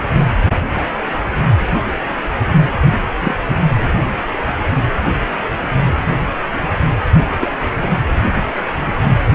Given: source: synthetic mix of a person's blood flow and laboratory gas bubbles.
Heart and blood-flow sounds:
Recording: Doppler ultrasound of blood flow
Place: precordium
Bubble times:
3.20-3.34 s: bubbles
7.42-7.47 s: bubbles
7.78-7.88 s: bubbles
From the record:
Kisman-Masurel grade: 123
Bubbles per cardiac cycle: 1 to 2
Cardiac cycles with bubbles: 10 to 50%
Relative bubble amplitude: loud (0.450 to 0.775)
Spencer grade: 2 (many but less than half of the cardiac periods contain bubble signals, singularly or in groups)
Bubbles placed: anywhere in the cardiac cycle

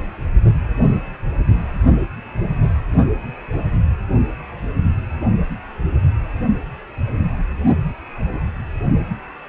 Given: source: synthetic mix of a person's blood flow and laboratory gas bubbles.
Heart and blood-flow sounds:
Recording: Doppler ultrasound of blood flow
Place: precordium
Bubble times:
no bubbles
From the record:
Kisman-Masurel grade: 000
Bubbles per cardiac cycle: 0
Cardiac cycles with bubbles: 0%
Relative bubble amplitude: no bubbles discernible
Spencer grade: 0 (complete lack of bubble signals)

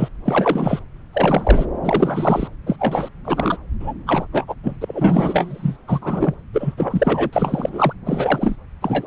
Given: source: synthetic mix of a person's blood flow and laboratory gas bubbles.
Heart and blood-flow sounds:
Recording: Doppler ultrasound of blood flow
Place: subclavian vein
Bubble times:
0.00-0.09 s: bubbles
0.25-0.79 s: bubbles
1.13-1.66 s: bubbles
1.83-2.48 s: bubbles
2.66-2.76 s: bubbles
2.79-3.08 s: bubbles
3.25-3.57 s: bubbles
3.80-3.93 s: bubbles
4.06-4.26 s: bubbles
4.32-4.54 s: bubbles
4.63-4.75 s: bubbles
4.80-4.84 s: bubbles
4.87-5.76 s: bubbles
5.88-6.34 s: bubbles
6.53-6.74 s: bubbles
6.77-7.30 s: bubbles
7.32-7.93 s: bubbles
8.06-8.55 s: bubbles
8.82-9.07 s: bubbles
From the record:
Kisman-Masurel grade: 343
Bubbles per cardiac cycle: rolling drumbeat, 9 or more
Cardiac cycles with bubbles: 100%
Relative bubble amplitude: loud (0.450 to 0.775)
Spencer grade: 3 (all of the cardiac periods contain showers or single bubble signals, but not dominating or overriding the cardiac motion signals)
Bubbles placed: anywhere in the cardiac cycle

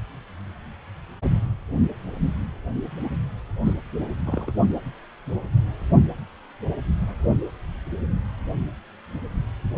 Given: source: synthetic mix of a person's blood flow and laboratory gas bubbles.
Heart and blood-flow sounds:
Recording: Doppler ultrasound of blood flow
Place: precordium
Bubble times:
3.64-3.73 s: bubbles
4.26-4.52 s: bubbles
From the record:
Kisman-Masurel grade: 111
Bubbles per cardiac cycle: 1 to 2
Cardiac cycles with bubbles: 1 to 10%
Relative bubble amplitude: barely perceptible (0.100 to 0.250)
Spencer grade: 1 (occasional bubble signal discernible with the cardiac motion signal, with majority of cardiac periods free of bubbles)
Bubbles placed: only in the low amplitude regions of the cardiac cycle

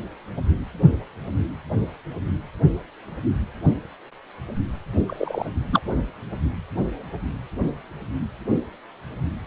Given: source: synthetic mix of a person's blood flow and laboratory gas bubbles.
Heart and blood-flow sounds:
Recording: Doppler ultrasound of blood flow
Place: precordium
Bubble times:
5.07-5.46 s: bubbles
5.72-5.81 s: bubbles
From the record:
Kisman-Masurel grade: 213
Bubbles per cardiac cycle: several, 3 to 8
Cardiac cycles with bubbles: 1 to 10%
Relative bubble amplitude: loud (0.450 to 0.775)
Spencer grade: 1 (occasional bubble signal discernible with the cardiac motion signal, with majority of cardiac periods free of bubbles)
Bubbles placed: only in the low amplitude regions of the cardiac cycle

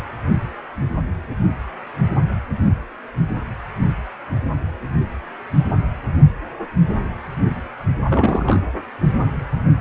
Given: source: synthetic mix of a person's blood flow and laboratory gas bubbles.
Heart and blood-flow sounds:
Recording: Doppler ultrasound of blood flow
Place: precordium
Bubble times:
8.10-8.61 s: bubbles
From the record:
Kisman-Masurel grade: 212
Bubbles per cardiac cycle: several, 3 to 8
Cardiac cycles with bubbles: 1 to 10%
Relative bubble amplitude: moderate (0.250 to 0.450)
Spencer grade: 1 (occasional bubble signal discernible with the cardiac motion signal, with majority of cardiac periods free of bubbles)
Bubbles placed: anywhere in the cardiac cycle

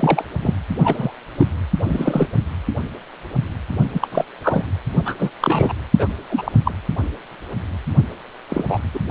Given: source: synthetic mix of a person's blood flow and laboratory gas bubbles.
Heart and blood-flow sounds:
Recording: Doppler ultrasound of blood flow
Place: precordium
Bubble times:
0.00-0.24 s: bubbles
0.42-0.55 s: bubbles
0.84-1.11 s: bubbles
1.37-1.47 s: bubbles
1.83-2.27 s: bubbles
3.94-4.07 s: bubbles
4.12-4.24 s: bubbles
4.43-4.64 s: bubbles
5.05-5.16 s: bubbles
5.19-5.30 s: bubbles
5.41-5.73 s: bubbles
5.99-6.07 s: bubbles
6.29-6.52 s: bubbles
6.64-6.72 s: bubbles
8.49-8.64 s: bubbles
8.68-8.79 s: bubbles
8.94-8.99 s: bubbles
From the record:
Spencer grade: 3 (all of the cardiac periods contain showers or single bubble signals, but not dominating or overriding the cardiac motion signals)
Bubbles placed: only in the low amplitude regions of the cardiac cycle

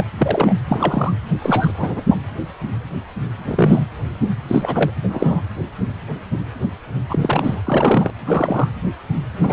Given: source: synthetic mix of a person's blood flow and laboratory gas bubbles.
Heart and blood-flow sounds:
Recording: Doppler ultrasound of blood flow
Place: precordium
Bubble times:
0.00-0.04 s: bubbles
0.17-0.54 s: bubbles
0.68-1.13 s: bubbles
1.42-1.73 s: bubbles
1.77-2.01 s: bubbles
2.09-2.17 s: bubbles
3.45-3.88 s: bubbles
4.47-4.90 s: bubbles
5.03-5.42 s: bubbles
7.09-7.62 s: bubbles
7.65-8.11 s: bubbles
8.25-8.68 s: bubbles
9.41-9.53 s: bubbles
From the record:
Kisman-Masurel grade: 232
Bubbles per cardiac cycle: several, 3 to 8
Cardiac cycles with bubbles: 50 to 99%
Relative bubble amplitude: moderate (0.250 to 0.450)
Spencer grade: 3 (all of the cardiac periods contain showers or single bubble signals, but not dominating or overriding the cardiac motion signals)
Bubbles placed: anywhere in the cardiac cycle

